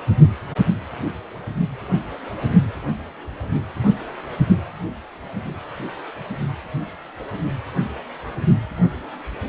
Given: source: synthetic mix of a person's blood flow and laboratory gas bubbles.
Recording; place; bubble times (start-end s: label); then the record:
Doppler ultrasound of blood flow; precordium
no bubbles
From the record:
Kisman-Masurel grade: 000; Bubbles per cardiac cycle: 0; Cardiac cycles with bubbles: 0%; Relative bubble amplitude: no bubbles discernible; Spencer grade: 0 (complete lack of bubble signals)